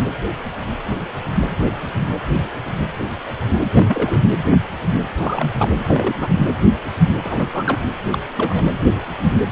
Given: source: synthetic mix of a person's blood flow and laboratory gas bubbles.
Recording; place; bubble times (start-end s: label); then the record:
Doppler ultrasound of blood flow; precordium
3.74-4.21 s: bubbles
5.18-5.49 s: bubbles
5.52-5.69 s: bubbles
5.78-6.14 s: bubbles
6.18-6.28 s: bubbles
7.23-7.46 s: bubbles
7.53-7.83 s: bubbles
8.10-8.19 s: bubbles
8.37-8.64 s: bubbles
From the record:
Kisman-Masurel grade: 222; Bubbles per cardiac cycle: several, 3 to 8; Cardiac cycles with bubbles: 10 to 50%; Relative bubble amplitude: moderate (0.250 to 0.450); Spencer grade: 2 (many but less than half of the cardiac periods contain bubble signals, singularly or in groups); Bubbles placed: anywhere in the cardiac cycle